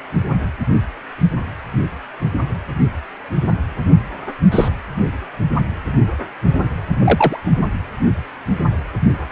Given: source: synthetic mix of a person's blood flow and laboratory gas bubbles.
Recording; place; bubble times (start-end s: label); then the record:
Doppler ultrasound of blood flow; precordium
4.52-4.68 s: bubbles
7.00-7.37 s: bubbles
From the record:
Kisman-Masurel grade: 123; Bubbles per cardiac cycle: 1 to 2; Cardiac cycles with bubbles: 10 to 50%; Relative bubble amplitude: loud (0.450 to 0.775); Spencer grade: 2 (many but less than half of the cardiac periods contain bubble signals, singularly or in groups); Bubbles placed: only in the low amplitude regions of the cardiac cycle